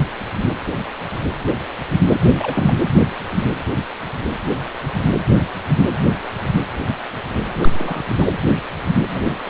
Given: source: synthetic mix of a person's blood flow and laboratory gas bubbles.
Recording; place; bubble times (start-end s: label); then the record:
Doppler ultrasound of blood flow; precordium
2.11-2.15 s: bubbles
2.40-2.75 s: bubbles
7.57-8.05 s: bubbles
8.18-8.26 s: bubbles
9.10-9.38 s: bubbles
From the record:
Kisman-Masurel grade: 222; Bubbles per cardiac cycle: several, 3 to 8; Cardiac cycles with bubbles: 10 to 50%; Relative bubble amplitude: moderate (0.250 to 0.450); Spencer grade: 2 (many but less than half of the cardiac periods contain bubble signals, singularly or in groups); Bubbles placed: anywhere in the cardiac cycle